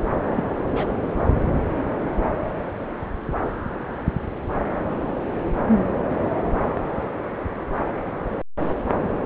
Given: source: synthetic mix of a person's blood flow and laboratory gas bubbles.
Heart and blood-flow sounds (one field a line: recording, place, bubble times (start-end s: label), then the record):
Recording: Doppler ultrasound of blood flow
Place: subclavian vein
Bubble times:
0.36-0.48 s: bubbles
0.71-0.88 s: bubbles
From the record:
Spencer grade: 1 (occasional bubble signal discernible with the cardiac motion signal, with majority of cardiac periods free of bubbles)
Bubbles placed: anywhere in the cardiac cycle